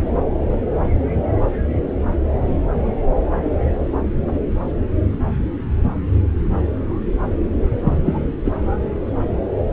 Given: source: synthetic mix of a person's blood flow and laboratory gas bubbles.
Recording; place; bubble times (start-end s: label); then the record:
Doppler ultrasound of blood flow; subclavian vein
7.82-8.19 s: bubbles
8.45-8.51 s: bubbles
From the record:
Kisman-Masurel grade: 113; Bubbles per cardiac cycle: 1 to 2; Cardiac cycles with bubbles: 1 to 10%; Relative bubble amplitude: loud (0.450 to 0.775); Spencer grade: 1 (occasional bubble signal discernible with the cardiac motion signal, with majority of cardiac periods free of bubbles); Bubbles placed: anywhere in the cardiac cycle